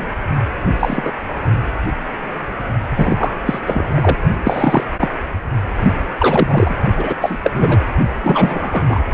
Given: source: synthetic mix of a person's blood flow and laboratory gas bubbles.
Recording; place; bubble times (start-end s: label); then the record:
Doppler ultrasound of blood flow; precordium
0.00-0.07 s: bubbles
0.79-1.12 s: bubbles
2.91-3.33 s: bubbles
3.46-3.60 s: bubbles
3.67-4.17 s: bubbles
4.43-4.84 s: bubbles
5.00-5.08 s: bubbles
6.19-6.75 s: bubbles
6.97-7.15 s: bubbles
7.21-7.39 s: bubbles
7.42-7.50 s: bubbles
7.53-7.78 s: bubbles
8.22-8.84 s: bubbles
8.88-9.04 s: bubbles
From the record:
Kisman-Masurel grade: 333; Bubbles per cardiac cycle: rolling drumbeat, 9 or more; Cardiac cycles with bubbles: 50 to 99%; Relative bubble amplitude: loud (0.450 to 0.775); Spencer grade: 3 (all of the cardiac periods contain showers or single bubble signals, but not dominating or overriding the cardiac motion signals); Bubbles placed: only in the low amplitude regions of the cardiac cycle